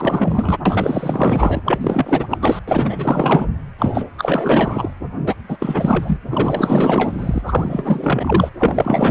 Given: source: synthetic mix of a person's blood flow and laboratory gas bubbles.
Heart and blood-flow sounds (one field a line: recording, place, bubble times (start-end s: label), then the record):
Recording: Doppler ultrasound of blood flow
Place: precordium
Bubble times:
0.00-0.59 s: bubbles
0.65-1.61 s: bubbles
1.66-2.27 s: bubbles
2.29-2.38 s: bubbles
2.41-2.60 s: bubbles
2.67-3.48 s: bubbles
3.78-4.05 s: bubbles
4.18-4.91 s: bubbles
5.25-5.34 s: bubbles
5.48-5.57 s: bubbles
5.59-6.19 s: bubbles
6.29-7.42 s: bubbles
7.44-8.49 s: bubbles
8.59-9.11 s: bubbles
From the record:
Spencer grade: 4 (maximum detectable bubble signal sounding continuously throughout systole and diastole of every cardiac period, and overriding the amplitude of the normal cardiac signals)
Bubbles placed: anywhere in the cardiac cycle